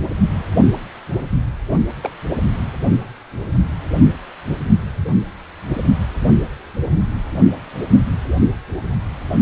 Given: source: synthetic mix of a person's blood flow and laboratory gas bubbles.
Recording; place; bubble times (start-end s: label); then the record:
Doppler ultrasound of blood flow; precordium
2.02-2.11 s: bubbles
2.29-2.36 s: bubbles
From the record:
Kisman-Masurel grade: 112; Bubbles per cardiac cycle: 1 to 2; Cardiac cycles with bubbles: 1 to 10%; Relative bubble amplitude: moderate (0.250 to 0.450); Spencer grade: 1 (occasional bubble signal discernible with the cardiac motion signal, with majority of cardiac periods free of bubbles); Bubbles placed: only in the low amplitude regions of the cardiac cycle